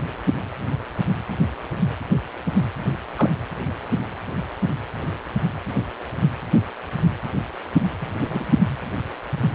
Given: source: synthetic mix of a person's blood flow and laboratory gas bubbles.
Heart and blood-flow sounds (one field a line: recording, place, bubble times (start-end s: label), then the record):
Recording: Doppler ultrasound of blood flow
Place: precordium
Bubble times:
3.15-3.30 s: bubbles
8.01-8.07 s: bubbles
8.20-8.64 s: bubbles
From the record:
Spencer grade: 2 (many but less than half of the cardiac periods contain bubble signals, singularly or in groups)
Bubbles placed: anywhere in the cardiac cycle